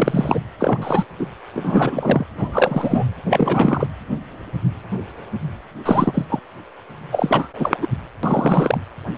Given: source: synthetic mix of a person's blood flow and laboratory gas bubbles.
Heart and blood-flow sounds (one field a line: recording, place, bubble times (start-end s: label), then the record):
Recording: Doppler ultrasound of blood flow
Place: precordium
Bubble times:
0.00-0.41 s: bubbles
0.59-1.04 s: bubbles
1.19-1.26 s: bubbles
1.53-2.25 s: bubbles
2.38-3.04 s: bubbles
3.29-3.87 s: bubbles
5.84-6.25 s: bubbles
6.29-6.40 s: bubbles
7.12-7.48 s: bubbles
7.58-7.75 s: bubbles
7.81-7.87 s: bubbles
8.23-8.81 s: bubbles
From the record:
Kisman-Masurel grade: 333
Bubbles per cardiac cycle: rolling drumbeat, 9 or more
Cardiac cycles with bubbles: 50 to 99%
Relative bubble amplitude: loud (0.450 to 0.775)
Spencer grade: 3 (all of the cardiac periods contain showers or single bubble signals, but not dominating or overriding the cardiac motion signals)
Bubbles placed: anywhere in the cardiac cycle